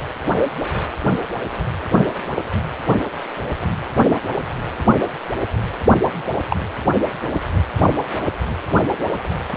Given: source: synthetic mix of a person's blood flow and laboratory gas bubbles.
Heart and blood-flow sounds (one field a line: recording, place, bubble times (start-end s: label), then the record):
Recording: Doppler ultrasound of blood flow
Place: precordium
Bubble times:
6.50-6.57 s: bubbles
From the record:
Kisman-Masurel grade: 122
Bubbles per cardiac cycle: 1 to 2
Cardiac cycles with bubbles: 10 to 50%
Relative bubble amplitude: moderate (0.250 to 0.450)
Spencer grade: 2 (many but less than half of the cardiac periods contain bubble signals, singularly or in groups)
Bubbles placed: anywhere in the cardiac cycle